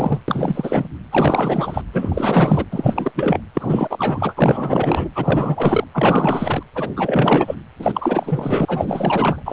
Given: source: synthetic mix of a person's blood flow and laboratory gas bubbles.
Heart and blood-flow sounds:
Doppler ultrasound of blood flow; precordium
0.00-0.22 s: bubbles
0.28-0.88 s: bubbles
1.11-1.81 s: bubbles
1.93-2.65 s: bubbles
2.71-3.12 s: bubbles
3.15-3.40 s: bubbles
3.54-4.33 s: bubbles
4.37-5.10 s: bubbles
5.14-5.84 s: bubbles
5.94-6.63 s: bubbles
6.75-6.89 s: bubbles
6.96-7.55 s: bubbles
7.79-9.43 s: bubbles
9.46-9.53 s: bubbles
From the record:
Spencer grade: 4 (maximum detectable bubble signal sounding continuously throughout systole and diastole of every cardiac period, and overriding the amplitude of the normal cardiac signals); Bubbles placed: anywhere in the cardiac cycle

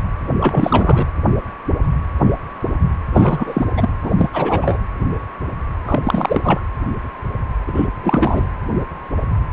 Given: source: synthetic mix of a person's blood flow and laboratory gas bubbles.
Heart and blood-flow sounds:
Doppler ultrasound of blood flow; precordium
0.40-1.06 s: bubbles
3.10-3.66 s: bubbles
3.77-3.89 s: bubbles
4.01-4.12 s: bubbles
4.18-4.29 s: bubbles
4.33-4.77 s: bubbles
5.87-6.61 s: bubbles
7.67-7.86 s: bubbles
8.03-8.47 s: bubbles
From the record:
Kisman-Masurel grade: 333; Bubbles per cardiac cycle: rolling drumbeat, 9 or more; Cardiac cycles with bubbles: 50 to 99%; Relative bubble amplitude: loud (0.450 to 0.775); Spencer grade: 3 (all of the cardiac periods contain showers or single bubble signals, but not dominating or overriding the cardiac motion signals); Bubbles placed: anywhere in the cardiac cycle

